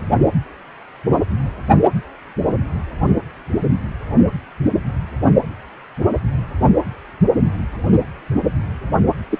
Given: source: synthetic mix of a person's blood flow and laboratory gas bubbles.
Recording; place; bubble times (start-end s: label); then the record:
Doppler ultrasound of blood flow; precordium
9.30-9.38 s: bubbles
From the record:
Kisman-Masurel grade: 113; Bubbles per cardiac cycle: 1 to 2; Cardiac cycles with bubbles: 1 to 10%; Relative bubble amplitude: loud (0.450 to 0.775); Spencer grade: 1 (occasional bubble signal discernible with the cardiac motion signal, with majority of cardiac periods free of bubbles); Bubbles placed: only in the low amplitude regions of the cardiac cycle